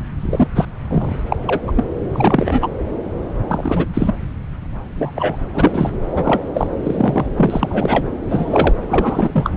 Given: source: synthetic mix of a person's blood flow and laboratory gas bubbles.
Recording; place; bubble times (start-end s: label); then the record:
Doppler ultrasound of blood flow; subclavian vein
0.20-0.48 s: bubbles
0.55-0.67 s: bubbles
0.89-1.15 s: bubbles
1.28-1.36 s: bubbles
1.47-1.60 s: bubbles
1.67-1.72 s: bubbles
1.75-1.83 s: bubbles
2.12-2.68 s: bubbles
3.48-3.87 s: bubbles
3.94-4.14 s: bubbles
4.98-5.12 s: bubbles
5.15-5.37 s: bubbles
5.54-5.96 s: bubbles
6.15-6.44 s: bubbles
6.54-6.67 s: bubbles
6.83-7.26 s: bubbles
7.37-8.05 s: bubbles
8.29-8.73 s: bubbles
8.89-9.51 s: bubbles
From the record:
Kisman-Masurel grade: 233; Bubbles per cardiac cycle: several, 3 to 8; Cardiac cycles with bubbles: 50 to 99%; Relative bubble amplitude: loud (0.450 to 0.775); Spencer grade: 3 (all of the cardiac periods contain showers or single bubble signals, but not dominating or overriding the cardiac motion signals); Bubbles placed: anywhere in the cardiac cycle